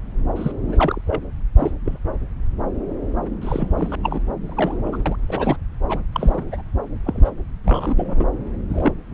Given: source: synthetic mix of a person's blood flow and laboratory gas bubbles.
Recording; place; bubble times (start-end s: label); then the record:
Doppler ultrasound of blood flow; subclavian vein
0.36-0.51 s: bubbles
0.67-1.01 s: bubbles
1.06-1.20 s: bubbles
1.56-1.72 s: bubbles
1.85-1.99 s: bubbles
3.42-3.96 s: bubbles
4.03-4.22 s: bubbles
4.44-4.77 s: bubbles
4.84-4.97 s: bubbles
5.05-5.15 s: bubbles
5.27-5.56 s: bubbles
5.88-6.00 s: bubbles
6.12-6.62 s: bubbles
7.04-7.30 s: bubbles
7.64-8.25 s: bubbles
8.70-8.95 s: bubbles
From the record:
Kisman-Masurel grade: 242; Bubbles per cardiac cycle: several, 3 to 8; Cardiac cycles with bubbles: 100%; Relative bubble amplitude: moderate (0.250 to 0.450); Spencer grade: 3 (all of the cardiac periods contain showers or single bubble signals, but not dominating or overriding the cardiac motion signals); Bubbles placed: anywhere in the cardiac cycle